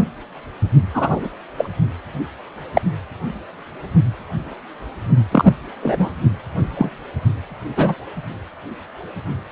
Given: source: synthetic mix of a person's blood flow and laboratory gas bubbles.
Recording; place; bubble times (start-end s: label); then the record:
Doppler ultrasound of blood flow; precordium
0.93-1.29 s: bubbles
1.57-1.69 s: bubbles
2.75-2.81 s: bubbles
5.31-5.53 s: bubbles
5.82-6.09 s: bubbles
6.77-6.89 s: bubbles
7.76-7.95 s: bubbles
From the record:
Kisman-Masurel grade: 123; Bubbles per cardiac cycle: 1 to 2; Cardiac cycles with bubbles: 10 to 50%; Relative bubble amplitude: loud (0.450 to 0.775); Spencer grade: 2 (many but less than half of the cardiac periods contain bubble signals, singularly or in groups); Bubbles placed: anywhere in the cardiac cycle